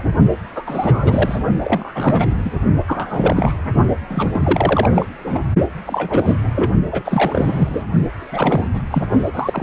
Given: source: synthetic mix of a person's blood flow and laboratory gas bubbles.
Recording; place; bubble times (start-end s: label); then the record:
Doppler ultrasound of blood flow; precordium
0.00-0.02 s: bubbles
0.55-1.38 s: bubbles
1.63-2.34 s: bubbles
2.45-2.52 s: bubbles
2.87-3.54 s: bubbles
4.07-4.30 s: bubbles
4.33-5.06 s: bubbles
5.24-5.38 s: bubbles
5.85-6.38 s: bubbles
6.55-6.71 s: bubbles
6.92-7.83 s: bubbles
8.31-8.68 s: bubbles
8.73-8.82 s: bubbles
8.90-9.03 s: bubbles
9.25-9.31 s: bubbles
9.33-9.63 s: bubbles
From the record:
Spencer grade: 3 (all of the cardiac periods contain showers or single bubble signals, but not dominating or overriding the cardiac motion signals); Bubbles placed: only in the low amplitude regions of the cardiac cycle